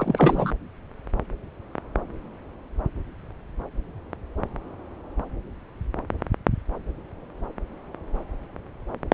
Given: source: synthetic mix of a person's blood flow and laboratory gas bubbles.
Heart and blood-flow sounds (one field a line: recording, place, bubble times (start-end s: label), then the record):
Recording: Doppler ultrasound of blood flow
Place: subclavian vein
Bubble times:
0.00-0.54 s: bubbles
From the record:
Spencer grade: 1 (occasional bubble signal discernible with the cardiac motion signal, with majority of cardiac periods free of bubbles)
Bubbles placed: anywhere in the cardiac cycle